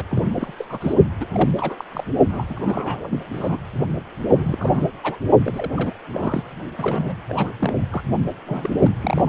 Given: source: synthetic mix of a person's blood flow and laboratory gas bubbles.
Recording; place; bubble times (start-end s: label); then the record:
Doppler ultrasound of blood flow; precordium
0.00-0.03 s: bubbles
0.11-0.53 s: bubbles
0.58-0.93 s: bubbles
1.20-1.26 s: bubbles
1.32-1.50 s: bubbles
1.57-1.84 s: bubbles
1.91-2.04 s: bubbles
2.29-2.46 s: bubbles
2.49-3.20 s: bubbles
3.33-3.58 s: bubbles
4.29-4.88 s: bubbles
5.03-5.17 s: bubbles
5.44-5.97 s: bubbles
6.12-6.43 s: bubbles
6.78-7.17 s: bubbles
7.29-7.50 s: bubbles
7.59-7.73 s: bubbles
7.91-8.03 s: bubbles
8.46-8.70 s: bubbles
8.82-8.92 s: bubbles
9.01-9.29 s: bubbles
From the record:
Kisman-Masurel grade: 342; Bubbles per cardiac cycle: rolling drumbeat, 9 or more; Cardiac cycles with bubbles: 100%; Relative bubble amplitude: moderate (0.250 to 0.450); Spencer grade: 3 (all of the cardiac periods contain showers or single bubble signals, but not dominating or overriding the cardiac motion signals); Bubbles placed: only in the low amplitude regions of the cardiac cycle